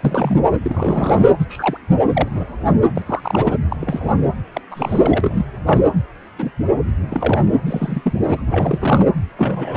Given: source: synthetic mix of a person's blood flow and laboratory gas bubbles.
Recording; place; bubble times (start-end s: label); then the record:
Doppler ultrasound of blood flow; precordium
0.00-0.41 s: bubbles
0.63-1.26 s: bubbles
1.39-1.45 s: bubbles
1.49-1.77 s: bubbles
2.13-2.29 s: bubbles
2.33-2.47 s: bubbles
2.95-3.02 s: bubbles
3.06-3.54 s: bubbles
3.70-3.77 s: bubbles
3.80-4.12 s: bubbles
4.54-4.61 s: bubbles
4.71-5.46 s: bubbles
5.66-5.82 s: bubbles
6.38-6.51 s: bubbles
7.09-7.38 s: bubbles
7.66-8.20 s: bubbles
8.25-8.42 s: bubbles
8.46-9.09 s: bubbles
9.37-9.76 s: bubbles
From the record:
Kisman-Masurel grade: 242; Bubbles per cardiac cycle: several, 3 to 8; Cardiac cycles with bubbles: 100%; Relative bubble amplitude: moderate (0.250 to 0.450); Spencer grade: 3 (all of the cardiac periods contain showers or single bubble signals, but not dominating or overriding the cardiac motion signals); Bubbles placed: anywhere in the cardiac cycle